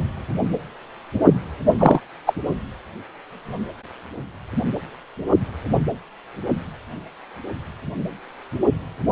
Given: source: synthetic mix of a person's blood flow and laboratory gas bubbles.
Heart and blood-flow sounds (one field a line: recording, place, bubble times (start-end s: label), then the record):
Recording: Doppler ultrasound of blood flow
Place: precordium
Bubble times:
1.79-2.00 s: bubbles
2.27-2.33 s: bubbles
From the record:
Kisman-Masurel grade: 113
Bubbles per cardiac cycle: 1 to 2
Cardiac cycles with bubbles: 1 to 10%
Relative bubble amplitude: loud (0.450 to 0.775)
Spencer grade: 1 (occasional bubble signal discernible with the cardiac motion signal, with majority of cardiac periods free of bubbles)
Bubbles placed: only in the low amplitude regions of the cardiac cycle